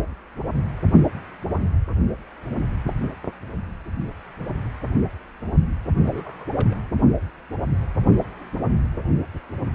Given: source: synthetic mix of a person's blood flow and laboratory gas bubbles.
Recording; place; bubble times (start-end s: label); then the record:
Doppler ultrasound of blood flow; precordium
6.01-6.76 s: bubbles
From the record:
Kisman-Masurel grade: 211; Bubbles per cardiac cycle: several, 3 to 8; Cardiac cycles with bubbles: 1 to 10%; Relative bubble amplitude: barely perceptible (0.100 to 0.250); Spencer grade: 1 (occasional bubble signal discernible with the cardiac motion signal, with majority of cardiac periods free of bubbles); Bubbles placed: anywhere in the cardiac cycle